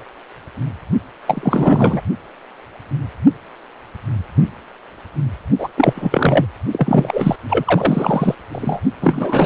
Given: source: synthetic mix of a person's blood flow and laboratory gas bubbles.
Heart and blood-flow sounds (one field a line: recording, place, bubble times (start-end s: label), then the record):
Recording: Doppler ultrasound of blood flow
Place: precordium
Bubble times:
1.27-2.01 s: bubbles
5.58-5.69 s: bubbles
5.77-6.46 s: bubbles
6.71-7.36 s: bubbles
7.49-8.35 s: bubbles
8.52-8.80 s: bubbles
9.01-9.45 s: bubbles
From the record:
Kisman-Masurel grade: 333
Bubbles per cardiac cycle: rolling drumbeat, 9 or more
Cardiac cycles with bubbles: 50 to 99%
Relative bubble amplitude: loud (0.450 to 0.775)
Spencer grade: 3 (all of the cardiac periods contain showers or single bubble signals, but not dominating or overriding the cardiac motion signals)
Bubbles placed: only in the low amplitude regions of the cardiac cycle